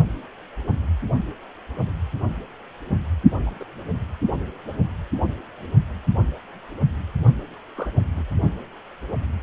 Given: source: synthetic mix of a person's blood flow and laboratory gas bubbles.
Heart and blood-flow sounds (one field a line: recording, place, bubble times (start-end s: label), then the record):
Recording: Doppler ultrasound of blood flow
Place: precordium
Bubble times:
3.46-3.51 s: bubbles
3.59-3.63 s: bubbles
7.77-7.91 s: bubbles
8.16-8.23 s: bubbles
From the record:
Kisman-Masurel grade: 121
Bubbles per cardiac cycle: 1 to 2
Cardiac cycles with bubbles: 10 to 50%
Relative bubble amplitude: barely perceptible (0.100 to 0.250)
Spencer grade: 2 (many but less than half of the cardiac periods contain bubble signals, singularly or in groups)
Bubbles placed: only in the low amplitude regions of the cardiac cycle